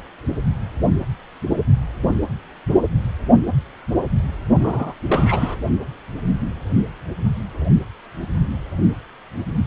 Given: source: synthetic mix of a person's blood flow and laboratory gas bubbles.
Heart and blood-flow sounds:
Doppler ultrasound of blood flow; precordium
4.59-4.93 s: bubbles
5.08-5.55 s: bubbles
From the record:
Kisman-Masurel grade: 222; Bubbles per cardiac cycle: several, 3 to 8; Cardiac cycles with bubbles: 10 to 50%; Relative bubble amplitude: moderate (0.250 to 0.450); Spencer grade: 2 (many but less than half of the cardiac periods contain bubble signals, singularly or in groups); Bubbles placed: only in the low amplitude regions of the cardiac cycle

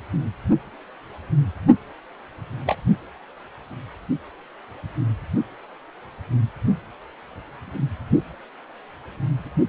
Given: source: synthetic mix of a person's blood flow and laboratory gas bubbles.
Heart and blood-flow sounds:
Doppler ultrasound of blood flow; precordium
2.66-2.75 s: bubbles
From the record:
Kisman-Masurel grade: 112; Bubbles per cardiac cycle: 1 to 2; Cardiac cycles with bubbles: 1 to 10%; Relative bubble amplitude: moderate (0.250 to 0.450); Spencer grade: 1 (occasional bubble signal discernible with the cardiac motion signal, with majority of cardiac periods free of bubbles); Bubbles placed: only in the low amplitude regions of the cardiac cycle

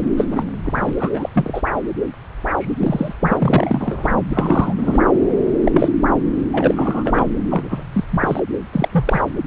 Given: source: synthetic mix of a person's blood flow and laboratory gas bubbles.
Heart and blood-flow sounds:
Doppler ultrasound of blood flow; subclavian vein
0.17-0.25 s: bubbles
0.31-0.43 s: bubbles
0.65-0.94 s: bubbles
0.99-1.10 s: bubbles
1.14-1.29 s: bubbles
1.33-1.62 s: bubbles
2.57-3.14 s: bubbles
3.21-4.09 s: bubbles
4.29-4.74 s: bubbles
4.78-4.99 s: bubbles
5.64-5.88 s: bubbles
6.52-7.29 s: bubbles
7.50-7.84 s: bubbles
7.92-8.04 s: bubbles
8.11-8.40 s: bubbles
8.72-8.88 s: bubbles
8.92-9.21 s: bubbles
From the record:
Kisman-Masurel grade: 242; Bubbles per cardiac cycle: several, 3 to 8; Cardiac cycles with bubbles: 100%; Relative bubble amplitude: moderate (0.250 to 0.450); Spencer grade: 3 (all of the cardiac periods contain showers or single bubble signals, but not dominating or overriding the cardiac motion signals); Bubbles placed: anywhere in the cardiac cycle

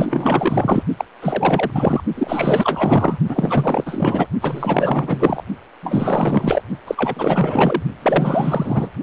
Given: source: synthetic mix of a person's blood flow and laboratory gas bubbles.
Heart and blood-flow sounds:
Doppler ultrasound of blood flow; precordium
0.00-0.83 s: bubbles
0.98-1.05 s: bubbles
1.22-2.04 s: bubbles
2.15-3.19 s: bubbles
3.29-4.28 s: bubbles
4.41-5.43 s: bubbles
5.83-6.62 s: bubbles
6.87-7.83 s: bubbles
8.02-8.90 s: bubbles
From the record:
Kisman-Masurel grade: 444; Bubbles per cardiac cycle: continuous sound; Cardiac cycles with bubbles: 100%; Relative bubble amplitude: maximal (0.775 to 0.999); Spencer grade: 4 (maximum detectable bubble signal sounding continuously throughout systole and diastole of every cardiac period, and overriding the amplitude of the normal cardiac signals); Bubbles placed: only in the low amplitude regions of the cardiac cycle

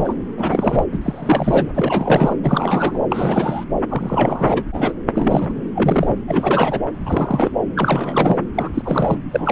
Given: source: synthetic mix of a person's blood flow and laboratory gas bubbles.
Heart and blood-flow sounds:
Doppler ultrasound of blood flow; subclavian vein
0.00-0.14 s: bubbles
0.37-0.85 s: bubbles
0.92-1.70 s: bubbles
1.74-2.35 s: bubbles
2.44-3.03 s: bubbles
3.09-3.65 s: bubbles
3.89-4.63 s: bubbles
4.72-4.96 s: bubbles
5.14-5.52 s: bubbles
5.75-6.16 s: bubbles
6.27-6.80 s: bubbles
7.05-7.51 s: bubbles
7.75-8.38 s: bubbles
8.54-8.69 s: bubbles
8.74-9.19 s: bubbles
9.31-9.52 s: bubbles
From the record:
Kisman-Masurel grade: 342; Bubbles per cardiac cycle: rolling drumbeat, 9 or more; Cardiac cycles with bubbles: 100%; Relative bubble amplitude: moderate (0.250 to 0.450); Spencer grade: 3 (all of the cardiac periods contain showers or single bubble signals, but not dominating or overriding the cardiac motion signals); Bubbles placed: anywhere in the cardiac cycle

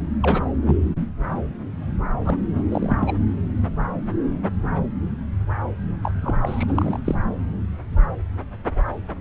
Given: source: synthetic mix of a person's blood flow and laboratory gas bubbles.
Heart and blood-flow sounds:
Doppler ultrasound of blood flow; subclavian vein
0.22-0.46 s: bubbles
0.66-0.77 s: bubbles
2.25-2.37 s: bubbles
2.71-2.98 s: bubbles
3.00-3.17 s: bubbles
6.02-6.11 s: bubbles
6.22-6.38 s: bubbles
6.41-6.64 s: bubbles
6.68-6.99 s: bubbles
7.04-7.15 s: bubbles
From the record:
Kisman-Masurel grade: 222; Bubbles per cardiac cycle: several, 3 to 8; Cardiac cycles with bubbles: 10 to 50%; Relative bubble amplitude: moderate (0.250 to 0.450); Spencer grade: 2 (many but less than half of the cardiac periods contain bubble signals, singularly or in groups); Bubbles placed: anywhere in the cardiac cycle

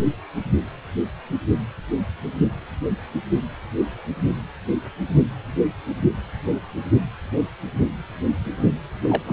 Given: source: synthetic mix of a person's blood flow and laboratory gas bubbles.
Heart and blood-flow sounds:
Doppler ultrasound of blood flow; precordium
9.02-9.23 s: bubbles
9.27-9.33 s: bubbles
From the record:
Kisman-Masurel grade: 212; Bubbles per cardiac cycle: several, 3 to 8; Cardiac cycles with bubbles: 1 to 10%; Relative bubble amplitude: moderate (0.250 to 0.450); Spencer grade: 1 (occasional bubble signal discernible with the cardiac motion signal, with majority of cardiac periods free of bubbles); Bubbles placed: anywhere in the cardiac cycle

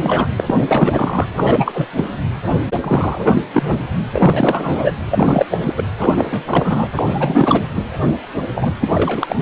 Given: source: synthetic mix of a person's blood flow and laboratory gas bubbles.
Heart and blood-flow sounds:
Doppler ultrasound of blood flow; precordium
0.00-0.28 s: bubbles
0.38-0.43 s: bubbles
0.47-1.26 s: bubbles
1.36-1.88 s: bubbles
1.93-2.11 s: bubbles
2.81-3.43 s: bubbles
3.53-3.88 s: bubbles
4.07-4.98 s: bubbles
5.09-5.46 s: bubbles
5.51-5.58 s: bubbles
5.61-5.74 s: bubbles
5.77-5.83 s: bubbles
5.99-6.44 s: bubbles
6.47-6.88 s: bubbles
6.95-7.03 s: bubbles
7.07-7.65 s: bubbles
7.75-7.82 s: bubbles
8.55-8.73 s: bubbles
8.80-9.36 s: bubbles
From the record:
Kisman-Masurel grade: 343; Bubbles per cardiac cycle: rolling drumbeat, 9 or more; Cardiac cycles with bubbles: 100%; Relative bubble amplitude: loud (0.450 to 0.775); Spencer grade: 3 (all of the cardiac periods contain showers or single bubble signals, but not dominating or overriding the cardiac motion signals); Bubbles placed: anywhere in the cardiac cycle

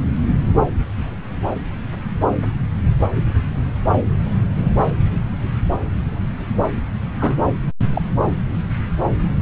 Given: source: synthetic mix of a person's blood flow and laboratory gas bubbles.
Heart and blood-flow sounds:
Doppler ultrasound of blood flow; subclavian vein
7.19-7.36 s: bubbles
7.95-8.02 s: bubbles
From the record:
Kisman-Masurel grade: 122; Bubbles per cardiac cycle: 1 to 2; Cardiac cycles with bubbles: 10 to 50%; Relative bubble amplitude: moderate (0.250 to 0.450); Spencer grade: 2 (many but less than half of the cardiac periods contain bubble signals, singularly or in groups); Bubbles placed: anywhere in the cardiac cycle

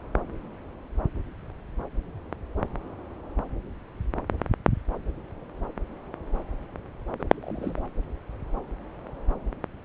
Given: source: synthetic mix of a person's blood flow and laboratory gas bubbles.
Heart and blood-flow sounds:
Doppler ultrasound of blood flow; subclavian vein
7.19-7.23 s: bubbles
7.37-7.81 s: bubbles
From the record:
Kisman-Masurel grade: 211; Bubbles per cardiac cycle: several, 3 to 8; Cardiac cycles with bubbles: 1 to 10%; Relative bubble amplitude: barely perceptible (0.100 to 0.250); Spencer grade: 1 (occasional bubble signal discernible with the cardiac motion signal, with majority of cardiac periods free of bubbles); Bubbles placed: anywhere in the cardiac cycle

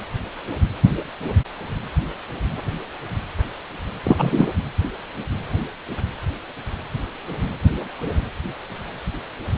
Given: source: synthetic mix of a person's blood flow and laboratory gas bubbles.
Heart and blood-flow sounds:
Doppler ultrasound of blood flow; precordium
4.03-4.53 s: bubbles
From the record:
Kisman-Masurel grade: 213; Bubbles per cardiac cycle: several, 3 to 8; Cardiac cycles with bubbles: 1 to 10%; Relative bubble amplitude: loud (0.450 to 0.775); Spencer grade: 1 (occasional bubble signal discernible with the cardiac motion signal, with majority of cardiac periods free of bubbles); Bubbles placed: anywhere in the cardiac cycle

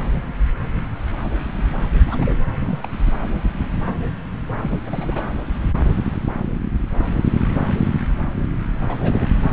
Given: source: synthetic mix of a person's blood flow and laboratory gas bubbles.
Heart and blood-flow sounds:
Doppler ultrasound of blood flow; subclavian vein
2.06-2.40 s: bubbles
2.56-2.89 s: bubbles
4.60-4.80 s: bubbles
4.86-5.23 s: bubbles
8.87-9.29 s: bubbles
From the record:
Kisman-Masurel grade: 221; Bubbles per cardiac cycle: several, 3 to 8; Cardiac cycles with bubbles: 10 to 50%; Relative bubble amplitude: barely perceptible (0.100 to 0.250); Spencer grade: 2 (many but less than half of the cardiac periods contain bubble signals, singularly or in groups); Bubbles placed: anywhere in the cardiac cycle

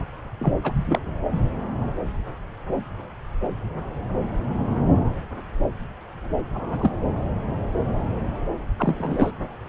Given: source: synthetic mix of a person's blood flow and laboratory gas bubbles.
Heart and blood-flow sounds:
Doppler ultrasound of blood flow; subclavian vein
0.39-0.57 s: bubbles
0.64-0.72 s: bubbles
0.75-0.99 s: bubbles
6.54-6.90 s: bubbles
8.79-9.32 s: bubbles
From the record:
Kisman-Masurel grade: 122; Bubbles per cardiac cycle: 1 to 2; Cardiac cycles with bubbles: 10 to 50%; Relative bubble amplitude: moderate (0.250 to 0.450); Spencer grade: 2 (many but less than half of the cardiac periods contain bubble signals, singularly or in groups); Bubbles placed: anywhere in the cardiac cycle

